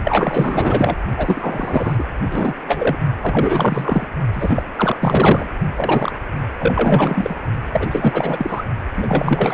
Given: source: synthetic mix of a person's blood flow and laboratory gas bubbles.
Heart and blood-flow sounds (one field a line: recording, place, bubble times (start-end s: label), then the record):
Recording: Doppler ultrasound of blood flow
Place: precordium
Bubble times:
0.04-0.96 s: bubbles
1.17-2.04 s: bubbles
2.19-2.53 s: bubbles
2.67-2.96 s: bubbles
3.23-4.07 s: bubbles
4.33-4.62 s: bubbles
4.76-4.97 s: bubbles
5.00-5.49 s: bubbles
5.75-6.12 s: bubbles
6.59-7.35 s: bubbles
7.72-7.88 s: bubbles
7.91-8.63 s: bubbles
8.97-9.54 s: bubbles
From the record:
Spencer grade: 4 (maximum detectable bubble signal sounding continuously throughout systole and diastole of every cardiac period, and overriding the amplitude of the normal cardiac signals)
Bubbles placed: only in the low amplitude regions of the cardiac cycle